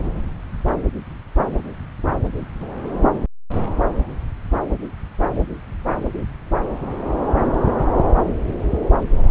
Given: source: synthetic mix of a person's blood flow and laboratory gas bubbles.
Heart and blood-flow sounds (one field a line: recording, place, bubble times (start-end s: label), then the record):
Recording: Doppler ultrasound of blood flow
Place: subclavian vein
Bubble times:
no bubbles
From the record:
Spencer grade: 0 (complete lack of bubble signals)